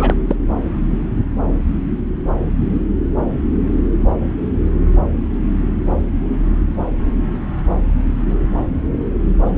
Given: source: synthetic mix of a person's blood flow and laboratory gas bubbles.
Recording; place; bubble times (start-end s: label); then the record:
Doppler ultrasound of blood flow; subclavian vein
0.00-0.14 s: bubbles
0.27-0.36 s: bubbles
From the record:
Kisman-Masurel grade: 213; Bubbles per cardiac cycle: several, 3 to 8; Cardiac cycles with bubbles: 1 to 10%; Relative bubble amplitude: loud (0.450 to 0.775); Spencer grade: 1 (occasional bubble signal discernible with the cardiac motion signal, with majority of cardiac periods free of bubbles); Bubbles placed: anywhere in the cardiac cycle